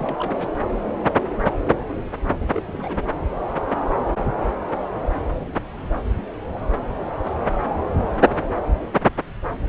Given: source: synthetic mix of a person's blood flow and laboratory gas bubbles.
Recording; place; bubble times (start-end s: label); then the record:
Doppler ultrasound of blood flow; subclavian vein
0.00-0.32 s: bubbles
0.39-0.47 s: bubbles
2.53-2.62 s: bubbles
2.67-3.03 s: bubbles
From the record:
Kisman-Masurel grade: 211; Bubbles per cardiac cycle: several, 3 to 8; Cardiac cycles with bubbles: 1 to 10%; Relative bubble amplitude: barely perceptible (0.100 to 0.250); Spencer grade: 1 (occasional bubble signal discernible with the cardiac motion signal, with majority of cardiac periods free of bubbles); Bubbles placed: anywhere in the cardiac cycle